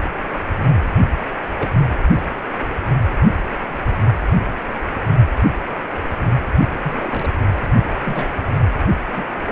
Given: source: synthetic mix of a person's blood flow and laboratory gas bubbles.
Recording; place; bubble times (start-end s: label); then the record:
Doppler ultrasound of blood flow; precordium
1.42-1.84 s: bubbles
6.82-7.29 s: bubbles
8.04-8.46 s: bubbles
9.16-9.24 s: bubbles
From the record:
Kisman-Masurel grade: 121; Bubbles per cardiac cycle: 1 to 2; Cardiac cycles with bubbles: 10 to 50%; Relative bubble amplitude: barely perceptible (0.100 to 0.250); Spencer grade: 2 (many but less than half of the cardiac periods contain bubble signals, singularly or in groups); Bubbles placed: anywhere in the cardiac cycle